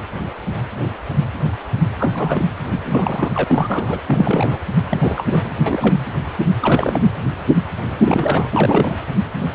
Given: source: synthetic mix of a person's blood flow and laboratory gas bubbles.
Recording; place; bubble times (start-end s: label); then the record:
Doppler ultrasound of blood flow; precordium
1.97-2.45 s: bubbles
2.71-2.80 s: bubbles
2.85-3.32 s: bubbles
3.35-4.02 s: bubbles
4.07-4.58 s: bubbles
4.89-5.50 s: bubbles
5.66-5.96 s: bubbles
6.61-7.00 s: bubbles
8.01-8.48 s: bubbles
8.53-8.99 s: bubbles
From the record:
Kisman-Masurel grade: 332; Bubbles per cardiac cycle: rolling drumbeat, 9 or more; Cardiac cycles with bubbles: 50 to 99%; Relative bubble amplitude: moderate (0.250 to 0.450); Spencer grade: 3 (all of the cardiac periods contain showers or single bubble signals, but not dominating or overriding the cardiac motion signals); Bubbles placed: anywhere in the cardiac cycle